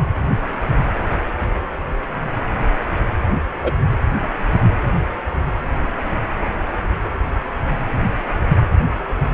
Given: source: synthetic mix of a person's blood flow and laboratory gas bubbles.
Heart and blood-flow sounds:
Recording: Doppler ultrasound of blood flow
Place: precordium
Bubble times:
3.63-3.71 s: bubbles
From the record:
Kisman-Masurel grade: 122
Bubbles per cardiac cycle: 1 to 2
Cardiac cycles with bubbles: 10 to 50%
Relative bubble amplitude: moderate (0.250 to 0.450)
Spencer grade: 2 (many but less than half of the cardiac periods contain bubble signals, singularly or in groups)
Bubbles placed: anywhere in the cardiac cycle

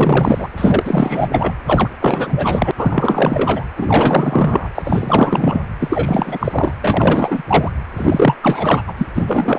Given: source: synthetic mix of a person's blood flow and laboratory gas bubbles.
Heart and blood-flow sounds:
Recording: Doppler ultrasound of blood flow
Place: precordium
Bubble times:
0.00-0.52 s: bubbles
0.57-1.28 s: bubbles
1.31-1.54 s: bubbles
1.66-1.90 s: bubbles
2.01-2.71 s: bubbles
2.77-3.66 s: bubbles
3.77-4.69 s: bubbles
4.75-5.63 s: bubbles
5.79-6.73 s: bubbles
6.82-7.43 s: bubbles
7.47-7.71 s: bubbles
7.96-8.37 s: bubbles
8.42-8.83 s: bubbles
8.87-8.94 s: bubbles
8.97-9.06 s: bubbles
9.14-9.25 s: bubbles
9.27-9.59 s: bubbles
From the record:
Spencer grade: 4 (maximum detectable bubble signal sounding continuously throughout systole and diastole of every cardiac period, and overriding the amplitude of the normal cardiac signals)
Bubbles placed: anywhere in the cardiac cycle

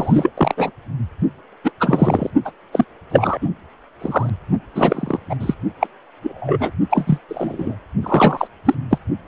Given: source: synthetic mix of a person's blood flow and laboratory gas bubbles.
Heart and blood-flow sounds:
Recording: Doppler ultrasound of blood flow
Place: precordium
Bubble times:
0.00-0.31 s: bubbles
0.37-0.71 s: bubbles
1.64-1.72 s: bubbles
1.80-2.30 s: bubbles
2.45-2.51 s: bubbles
2.72-2.84 s: bubbles
3.09-3.38 s: bubbles
3.41-3.49 s: bubbles
4.00-4.30 s: bubbles
4.75-5.20 s: bubbles
5.29-5.36 s: bubbles
5.40-5.54 s: bubbles
5.80-5.87 s: bubbles
6.23-6.71 s: bubbles
6.90-7.19 s: bubbles
7.29-7.75 s: bubbles
8.02-8.47 s: bubbles
8.65-8.74 s: bubbles
8.90-8.98 s: bubbles
From the record:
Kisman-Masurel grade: 243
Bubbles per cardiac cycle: several, 3 to 8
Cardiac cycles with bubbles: 100%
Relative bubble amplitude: loud (0.450 to 0.775)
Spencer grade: 3 (all of the cardiac periods contain showers or single bubble signals, but not dominating or overriding the cardiac motion signals)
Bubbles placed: only in the low amplitude regions of the cardiac cycle

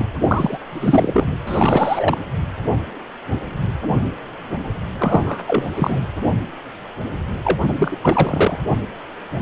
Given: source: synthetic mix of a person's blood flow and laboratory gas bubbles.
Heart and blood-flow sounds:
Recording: Doppler ultrasound of blood flow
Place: precordium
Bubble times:
0.00-0.04 s: bubbles
0.21-0.57 s: bubbles
0.69-1.27 s: bubbles
1.47-2.18 s: bubbles
4.98-5.43 s: bubbles
5.47-5.63 s: bubbles
5.75-6.00 s: bubbles
7.43-7.57 s: bubbles
7.67-7.98 s: bubbles
8.02-8.59 s: bubbles
From the record:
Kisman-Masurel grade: 333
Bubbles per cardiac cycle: rolling drumbeat, 9 or more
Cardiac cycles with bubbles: 50 to 99%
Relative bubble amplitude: loud (0.450 to 0.775)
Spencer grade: 3 (all of the cardiac periods contain showers or single bubble signals, but not dominating or overriding the cardiac motion signals)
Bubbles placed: anywhere in the cardiac cycle

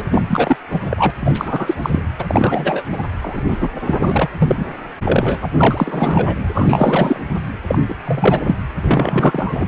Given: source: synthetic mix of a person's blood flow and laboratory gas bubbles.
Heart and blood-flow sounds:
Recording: Doppler ultrasound of blood flow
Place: precordium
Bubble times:
0.00-0.04 s: bubbles
0.10-0.56 s: bubbles
0.70-0.80 s: bubbles
0.83-1.10 s: bubbles
1.20-1.74 s: bubbles
1.82-2.02 s: bubbles
2.19-2.25 s: bubbles
2.27-2.82 s: bubbles
2.91-3.07 s: bubbles
3.21-3.69 s: bubbles
3.85-4.29 s: bubbles
4.39-4.74 s: bubbles
5.05-5.47 s: bubbles
5.58-6.38 s: bubbles
6.54-7.20 s: bubbles
7.67-7.79 s: bubbles
7.88-7.96 s: bubbles
8.05-8.40 s: bubbles
8.47-8.55 s: bubbles
8.81-9.67 s: bubbles
From the record:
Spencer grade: 3 (all of the cardiac periods contain showers or single bubble signals, but not dominating or overriding the cardiac motion signals)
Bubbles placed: anywhere in the cardiac cycle

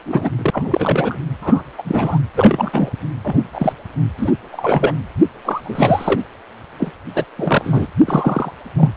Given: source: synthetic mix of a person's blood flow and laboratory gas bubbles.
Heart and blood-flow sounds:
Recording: Doppler ultrasound of blood flow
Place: precordium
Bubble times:
0.06-0.30 s: bubbles
0.38-1.19 s: bubbles
1.42-1.62 s: bubbles
1.78-1.82 s: bubbles
1.84-2.19 s: bubbles
2.36-2.70 s: bubbles
2.72-2.90 s: bubbles
3.24-3.44 s: bubbles
3.52-3.72 s: bubbles
4.17-4.33 s: bubbles
4.51-4.95 s: bubbles
5.44-6.21 s: bubbles
6.79-6.92 s: bubbles
7.15-7.25 s: bubbles
7.37-7.87 s: bubbles
8.00-8.51 s: bubbles
8.77-8.91 s: bubbles
From the record:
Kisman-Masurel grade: 243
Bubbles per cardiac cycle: several, 3 to 8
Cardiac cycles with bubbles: 100%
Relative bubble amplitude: loud (0.450 to 0.775)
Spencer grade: 3 (all of the cardiac periods contain showers or single bubble signals, but not dominating or overriding the cardiac motion signals)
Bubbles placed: anywhere in the cardiac cycle

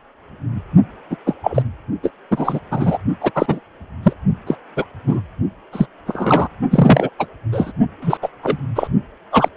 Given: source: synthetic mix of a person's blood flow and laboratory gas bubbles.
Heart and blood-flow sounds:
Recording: Doppler ultrasound of blood flow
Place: precordium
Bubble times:
1.10-1.17 s: bubbles
1.26-1.34 s: bubbles
1.43-1.62 s: bubbles
2.03-2.10 s: bubbles
2.31-2.59 s: bubbles
2.71-2.98 s: bubbles
3.20-3.31 s: bubbles
3.34-3.60 s: bubbles
4.03-4.13 s: bubbles
4.46-4.56 s: bubbles
4.75-4.85 s: bubbles
5.07-5.21 s: bubbles
5.72-5.87 s: bubbles
6.07-6.48 s: bubbles
6.71-7.10 s: bubbles
7.18-7.26 s: bubbles
7.52-7.72 s: bubbles
8.01-8.18 s: bubbles
8.22-8.28 s: bubbles
8.43-8.58 s: bubbles
8.75-8.88 s: bubbles
9.32-9.49 s: bubbles
From the record:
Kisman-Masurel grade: 243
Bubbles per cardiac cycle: several, 3 to 8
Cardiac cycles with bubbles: 100%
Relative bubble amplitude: loud (0.450 to 0.775)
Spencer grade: 3 (all of the cardiac periods contain showers or single bubble signals, but not dominating or overriding the cardiac motion signals)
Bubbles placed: only in the low amplitude regions of the cardiac cycle

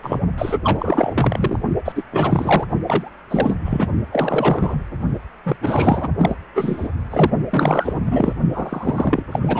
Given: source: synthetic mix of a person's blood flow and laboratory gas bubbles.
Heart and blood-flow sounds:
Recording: Doppler ultrasound of blood flow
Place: precordium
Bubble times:
0.02-0.19 s: bubbles
0.38-0.59 s: bubbles
0.64-1.59 s: bubbles
1.84-1.92 s: bubbles
1.95-2.04 s: bubbles
2.12-2.65 s: bubbles
2.87-3.10 s: bubbles
3.31-3.56 s: bubbles
3.65-3.87 s: bubbles
4.12-4.83 s: bubbles
5.46-5.56 s: bubbles
5.62-6.09 s: bubbles
6.19-6.36 s: bubbles
6.54-6.88 s: bubbles
7.10-7.30 s: bubbles
7.50-8.33 s: bubbles
8.53-9.23 s: bubbles
9.31-9.60 s: bubbles
From the record:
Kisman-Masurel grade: 343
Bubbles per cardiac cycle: rolling drumbeat, 9 or more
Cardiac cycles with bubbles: 100%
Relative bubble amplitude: loud (0.450 to 0.775)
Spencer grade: 3 (all of the cardiac periods contain showers or single bubble signals, but not dominating or overriding the cardiac motion signals)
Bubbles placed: only in the low amplitude regions of the cardiac cycle

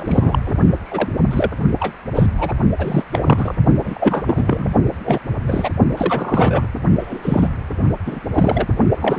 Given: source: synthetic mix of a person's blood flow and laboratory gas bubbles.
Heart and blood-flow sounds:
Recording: Doppler ultrasound of blood flow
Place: precordium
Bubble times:
0.00-0.41 s: bubbles
0.44-0.57 s: bubbles
0.85-1.08 s: bubbles
1.31-1.50 s: bubbles
1.79-1.95 s: bubbles
2.14-2.29 s: bubbles
2.37-2.53 s: bubbles
2.78-3.04 s: bubbles
3.09-3.55 s: bubbles
3.84-4.68 s: bubbles
5.04-5.21 s: bubbles
5.46-5.69 s: bubbles
5.97-6.67 s: bubbles
6.99-7.48 s: bubbles
8.05-8.20 s: bubbles
8.33-8.67 s: bubbles
8.95-9.18 s: bubbles
From the record:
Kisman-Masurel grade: 343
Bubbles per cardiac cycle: rolling drumbeat, 9 or more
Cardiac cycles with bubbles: 100%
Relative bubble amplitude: loud (0.450 to 0.775)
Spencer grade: 3 (all of the cardiac periods contain showers or single bubble signals, but not dominating or overriding the cardiac motion signals)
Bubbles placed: only in the low amplitude regions of the cardiac cycle

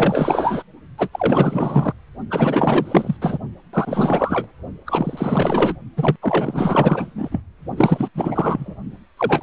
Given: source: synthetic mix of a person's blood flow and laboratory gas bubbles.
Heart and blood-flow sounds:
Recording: Doppler ultrasound of blood flow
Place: precordium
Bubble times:
0.00-0.62 s: bubbles
0.98-1.08 s: bubbles
1.12-1.93 s: bubbles
2.30-3.17 s: bubbles
3.21-3.38 s: bubbles
3.73-4.46 s: bubbles
4.86-5.76 s: bubbles
5.96-6.16 s: bubbles
6.21-7.41 s: bubbles
7.76-8.09 s: bubbles
8.15-8.75 s: bubbles
9.17-9.43 s: bubbles
From the record:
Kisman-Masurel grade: 444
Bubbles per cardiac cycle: continuous sound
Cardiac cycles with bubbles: 100%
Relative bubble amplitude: maximal (0.775 to 0.999)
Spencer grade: 4 (maximum detectable bubble signal sounding continuously throughout systole and diastole of every cardiac period, and overriding the amplitude of the normal cardiac signals)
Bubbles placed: only in the low amplitude regions of the cardiac cycle

